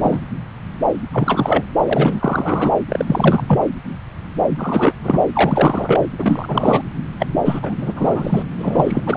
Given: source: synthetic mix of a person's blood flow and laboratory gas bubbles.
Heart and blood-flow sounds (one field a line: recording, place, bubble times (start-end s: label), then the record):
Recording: Doppler ultrasound of blood flow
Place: subclavian vein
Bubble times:
0.03-0.21 s: bubbles
1.12-1.64 s: bubbles
1.80-2.71 s: bubbles
2.88-3.63 s: bubbles
4.51-4.95 s: bubbles
5.03-5.25 s: bubbles
5.32-6.07 s: bubbles
6.18-6.82 s: bubbles
7.19-7.27 s: bubbles
7.45-7.60 s: bubbles
7.62-8.44 s: bubbles
8.58-9.01 s: bubbles
9.06-9.17 s: bubbles
From the record:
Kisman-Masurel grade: 333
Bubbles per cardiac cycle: rolling drumbeat, 9 or more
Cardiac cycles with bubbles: 50 to 99%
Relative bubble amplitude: loud (0.450 to 0.775)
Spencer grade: 3 (all of the cardiac periods contain showers or single bubble signals, but not dominating or overriding the cardiac motion signals)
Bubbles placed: anywhere in the cardiac cycle